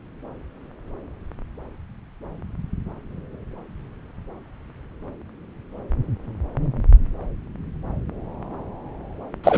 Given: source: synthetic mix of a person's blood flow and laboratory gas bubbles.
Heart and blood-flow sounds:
Doppler ultrasound of blood flow; subclavian vein
9.44-9.57 s: bubbles
From the record:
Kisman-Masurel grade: 213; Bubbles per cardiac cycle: several, 3 to 8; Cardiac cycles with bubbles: 1 to 10%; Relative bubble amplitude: loud (0.450 to 0.775); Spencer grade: 1 (occasional bubble signal discernible with the cardiac motion signal, with majority of cardiac periods free of bubbles); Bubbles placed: anywhere in the cardiac cycle

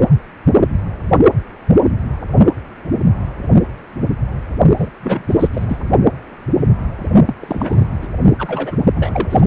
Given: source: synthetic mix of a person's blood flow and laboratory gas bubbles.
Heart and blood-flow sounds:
Doppler ultrasound of blood flow; precordium
4.78-4.90 s: bubbles
5.02-5.47 s: bubbles
5.53-5.65 s: bubbles
5.68-5.78 s: bubbles
7.26-7.35 s: bubbles
7.39-7.87 s: bubbles
8.02-8.08 s: bubbles
8.38-8.77 s: bubbles
8.95-9.46 s: bubbles
From the record:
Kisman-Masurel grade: 333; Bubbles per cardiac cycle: rolling drumbeat, 9 or more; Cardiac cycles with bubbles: 50 to 99%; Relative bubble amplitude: loud (0.450 to 0.775); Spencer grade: 3 (all of the cardiac periods contain showers or single bubble signals, but not dominating or overriding the cardiac motion signals); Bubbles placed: only in the low amplitude regions of the cardiac cycle

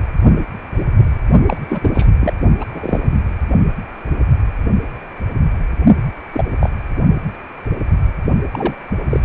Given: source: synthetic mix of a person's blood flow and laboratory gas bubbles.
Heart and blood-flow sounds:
Doppler ultrasound of blood flow; precordium
1.45-1.57 s: bubbles
1.70-2.06 s: bubbles
2.20-2.33 s: bubbles
2.60-2.65 s: bubbles
2.72-3.18 s: bubbles
6.32-6.45 s: bubbles
6.60-6.69 s: bubbles
8.52-8.74 s: bubbles
9.10-9.25 s: bubbles
From the record:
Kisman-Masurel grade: 233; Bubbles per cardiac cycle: several, 3 to 8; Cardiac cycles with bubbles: 50 to 99%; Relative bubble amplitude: loud (0.450 to 0.775); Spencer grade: 3 (all of the cardiac periods contain showers or single bubble signals, but not dominating or overriding the cardiac motion signals); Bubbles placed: only in the low amplitude regions of the cardiac cycle

